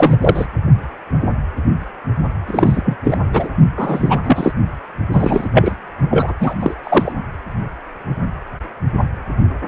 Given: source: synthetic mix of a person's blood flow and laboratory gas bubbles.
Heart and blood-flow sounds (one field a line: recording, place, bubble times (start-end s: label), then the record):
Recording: Doppler ultrasound of blood flow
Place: precordium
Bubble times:
0.00-0.18 s: bubbles
0.20-0.47 s: bubbles
2.46-2.96 s: bubbles
3.03-3.17 s: bubbles
3.33-3.49 s: bubbles
3.76-4.20 s: bubbles
4.24-4.54 s: bubbles
5.12-5.48 s: bubbles
5.53-5.75 s: bubbles
6.10-6.33 s: bubbles
6.40-6.56 s: bubbles
6.60-6.75 s: bubbles
6.83-7.12 s: bubbles
From the record:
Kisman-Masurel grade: 223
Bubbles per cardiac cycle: several, 3 to 8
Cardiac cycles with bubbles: 10 to 50%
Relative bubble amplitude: loud (0.450 to 0.775)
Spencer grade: 2 (many but less than half of the cardiac periods contain bubble signals, singularly or in groups)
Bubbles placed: only in the low amplitude regions of the cardiac cycle